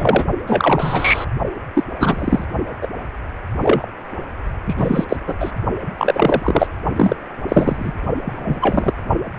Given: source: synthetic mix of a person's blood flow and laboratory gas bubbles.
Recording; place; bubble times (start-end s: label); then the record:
Doppler ultrasound of blood flow; precordium
0.00-0.26 s: bubbles
0.47-1.24 s: bubbles
1.74-1.83 s: bubbles
1.99-2.45 s: bubbles
2.81-2.88 s: bubbles
3.62-3.87 s: bubbles
4.68-5.04 s: bubbles
5.08-5.17 s: bubbles
5.27-5.34 s: bubbles
5.40-5.52 s: bubbles
5.98-6.67 s: bubbles
6.96-7.16 s: bubbles
7.48-7.92 s: bubbles
8.24-8.93 s: bubbles
From the record:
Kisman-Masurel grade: 243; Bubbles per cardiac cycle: several, 3 to 8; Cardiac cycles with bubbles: 100%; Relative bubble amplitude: loud (0.450 to 0.775); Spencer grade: 3 (all of the cardiac periods contain showers or single bubble signals, but not dominating or overriding the cardiac motion signals); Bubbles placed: only in the low amplitude regions of the cardiac cycle